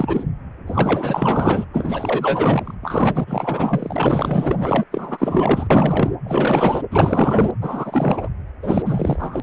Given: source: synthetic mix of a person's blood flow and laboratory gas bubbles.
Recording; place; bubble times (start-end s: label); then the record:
Doppler ultrasound of blood flow; precordium
0.00-0.24 s: bubbles
0.67-1.65 s: bubbles
1.73-2.75 s: bubbles
2.83-4.83 s: bubbles
4.91-5.67 s: bubbles
5.70-6.12 s: bubbles
6.24-6.83 s: bubbles
6.90-7.51 s: bubbles
7.61-8.29 s: bubbles
8.62-8.82 s: bubbles
8.85-9.40 s: bubbles
From the record:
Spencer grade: 4 (maximum detectable bubble signal sounding continuously throughout systole and diastole of every cardiac period, and overriding the amplitude of the normal cardiac signals); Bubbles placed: anywhere in the cardiac cycle